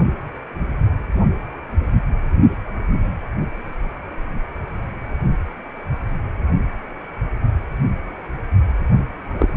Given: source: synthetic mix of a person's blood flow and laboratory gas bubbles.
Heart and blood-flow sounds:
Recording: Doppler ultrasound of blood flow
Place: precordium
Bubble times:
9.39-9.54 s: bubbles
From the record:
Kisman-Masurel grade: 113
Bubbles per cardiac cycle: 1 to 2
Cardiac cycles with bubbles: 1 to 10%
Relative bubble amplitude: loud (0.450 to 0.775)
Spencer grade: 1 (occasional bubble signal discernible with the cardiac motion signal, with majority of cardiac periods free of bubbles)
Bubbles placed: only in the low amplitude regions of the cardiac cycle

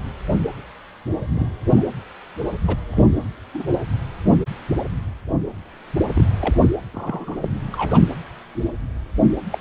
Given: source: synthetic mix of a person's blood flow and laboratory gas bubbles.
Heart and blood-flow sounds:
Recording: Doppler ultrasound of blood flow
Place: precordium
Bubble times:
1.35-1.52 s: bubbles
1.70-1.83 s: bubbles
2.67-2.75 s: bubbles
2.91-3.06 s: bubbles
3.54-3.65 s: bubbles
6.14-6.25 s: bubbles
6.39-6.56 s: bubbles
6.92-7.50 s: bubbles
7.72-8.01 s: bubbles
9.51-9.58 s: bubbles
From the record:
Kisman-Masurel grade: 122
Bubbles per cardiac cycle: 1 to 2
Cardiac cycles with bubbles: 10 to 50%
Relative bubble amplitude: moderate (0.250 to 0.450)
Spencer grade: 2 (many but less than half of the cardiac periods contain bubble signals, singularly or in groups)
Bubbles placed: anywhere in the cardiac cycle

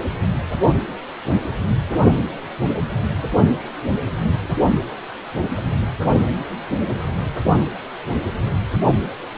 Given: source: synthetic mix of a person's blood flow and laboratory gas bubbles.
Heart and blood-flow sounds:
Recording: Doppler ultrasound of blood flow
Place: precordium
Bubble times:
no bubbles
From the record:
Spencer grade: 0 (complete lack of bubble signals)

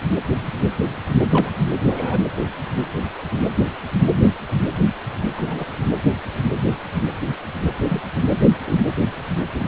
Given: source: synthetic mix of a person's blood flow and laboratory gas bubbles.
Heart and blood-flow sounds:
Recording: Doppler ultrasound of blood flow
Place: precordium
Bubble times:
1.30-1.50 s: bubbles
1.83-2.19 s: bubbles
5.37-5.64 s: bubbles
7.82-8.02 s: bubbles
8.65-8.81 s: bubbles
9.59-9.67 s: bubbles
From the record:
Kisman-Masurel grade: 121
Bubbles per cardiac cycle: 1 to 2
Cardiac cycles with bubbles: 10 to 50%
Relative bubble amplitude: barely perceptible (0.100 to 0.250)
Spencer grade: 2 (many but less than half of the cardiac periods contain bubble signals, singularly or in groups)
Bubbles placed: anywhere in the cardiac cycle

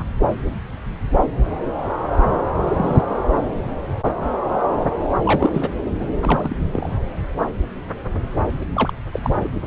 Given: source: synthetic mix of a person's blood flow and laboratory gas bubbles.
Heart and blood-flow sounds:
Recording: Doppler ultrasound of blood flow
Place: subclavian vein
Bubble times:
2.67-3.02 s: bubbles
5.23-5.69 s: bubbles
5.91-6.07 s: bubbles
6.19-6.56 s: bubbles
6.58-6.69 s: bubbles
6.71-6.89 s: bubbles
8.73-8.94 s: bubbles
9.12-9.20 s: bubbles
9.22-9.30 s: bubbles
9.42-9.50 s: bubbles
From the record:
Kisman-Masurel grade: 222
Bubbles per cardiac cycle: several, 3 to 8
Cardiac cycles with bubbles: 10 to 50%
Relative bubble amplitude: moderate (0.250 to 0.450)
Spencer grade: 2 (many but less than half of the cardiac periods contain bubble signals, singularly or in groups)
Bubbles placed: anywhere in the cardiac cycle

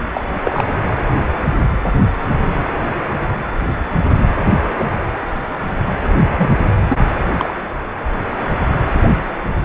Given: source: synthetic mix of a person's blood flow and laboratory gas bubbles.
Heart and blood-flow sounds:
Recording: Doppler ultrasound of blood flow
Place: precordium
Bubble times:
0.13-0.25 s: bubbles
0.43-0.65 s: bubbles
4.78-4.85 s: bubbles
6.37-6.51 s: bubbles
6.89-6.97 s: bubbles
7.37-7.54 s: bubbles
From the record:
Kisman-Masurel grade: 122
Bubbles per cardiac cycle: 1 to 2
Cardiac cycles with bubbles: 10 to 50%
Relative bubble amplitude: moderate (0.250 to 0.450)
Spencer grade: 2 (many but less than half of the cardiac periods contain bubble signals, singularly or in groups)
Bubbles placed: anywhere in the cardiac cycle

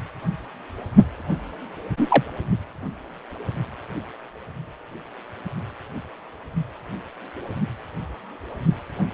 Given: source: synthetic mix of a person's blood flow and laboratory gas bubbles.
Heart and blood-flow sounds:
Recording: Doppler ultrasound of blood flow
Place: precordium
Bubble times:
1.97-2.24 s: bubbles
From the record:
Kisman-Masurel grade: 113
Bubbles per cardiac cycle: 1 to 2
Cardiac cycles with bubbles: 1 to 10%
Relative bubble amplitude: loud (0.450 to 0.775)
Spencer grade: 1 (occasional bubble signal discernible with the cardiac motion signal, with majority of cardiac periods free of bubbles)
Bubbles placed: only in the low amplitude regions of the cardiac cycle

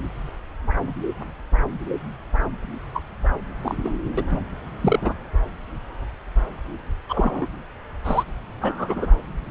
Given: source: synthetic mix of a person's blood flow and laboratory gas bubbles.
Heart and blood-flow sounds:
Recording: Doppler ultrasound of blood flow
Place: subclavian vein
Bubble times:
2.94-3.02 s: bubbles
3.62-3.77 s: bubbles
3.83-3.94 s: bubbles
4.18-4.24 s: bubbles
4.30-4.40 s: bubbles
4.82-5.14 s: bubbles
7.09-7.48 s: bubbles
8.04-8.24 s: bubbles
8.61-9.07 s: bubbles
From the record:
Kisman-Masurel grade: 232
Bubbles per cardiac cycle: several, 3 to 8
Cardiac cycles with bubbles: 50 to 99%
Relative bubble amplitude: moderate (0.250 to 0.450)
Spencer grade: 3 (all of the cardiac periods contain showers or single bubble signals, but not dominating or overriding the cardiac motion signals)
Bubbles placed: anywhere in the cardiac cycle

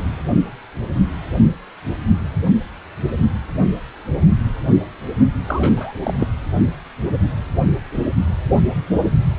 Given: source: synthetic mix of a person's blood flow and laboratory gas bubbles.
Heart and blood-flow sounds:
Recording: Doppler ultrasound of blood flow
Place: precordium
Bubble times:
5.46-5.73 s: bubbles
5.77-5.94 s: bubbles
6.03-6.13 s: bubbles
6.19-6.29 s: bubbles
From the record:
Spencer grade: 1 (occasional bubble signal discernible with the cardiac motion signal, with majority of cardiac periods free of bubbles)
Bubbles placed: only in the low amplitude regions of the cardiac cycle

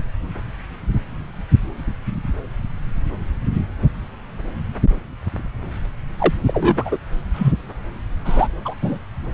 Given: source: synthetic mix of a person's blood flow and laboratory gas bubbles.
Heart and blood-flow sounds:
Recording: Doppler ultrasound of blood flow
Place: subclavian vein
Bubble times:
6.18-6.33 s: bubbles
6.46-6.97 s: bubbles
7.33-7.52 s: bubbles
8.25-8.48 s: bubbles
8.65-8.75 s: bubbles
8.82-8.99 s: bubbles
From the record:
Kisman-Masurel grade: 123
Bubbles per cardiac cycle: 1 to 2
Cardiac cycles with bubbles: 10 to 50%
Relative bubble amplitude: loud (0.450 to 0.775)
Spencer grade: 2 (many but less than half of the cardiac periods contain bubble signals, singularly or in groups)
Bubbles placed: anywhere in the cardiac cycle

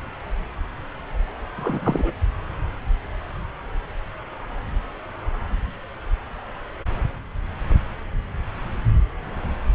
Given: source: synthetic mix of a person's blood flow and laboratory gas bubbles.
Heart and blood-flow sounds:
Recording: Doppler ultrasound of blood flow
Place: subclavian vein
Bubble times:
1.56-2.14 s: bubbles
From the record:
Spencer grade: 1 (occasional bubble signal discernible with the cardiac motion signal, with majority of cardiac periods free of bubbles)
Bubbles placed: anywhere in the cardiac cycle

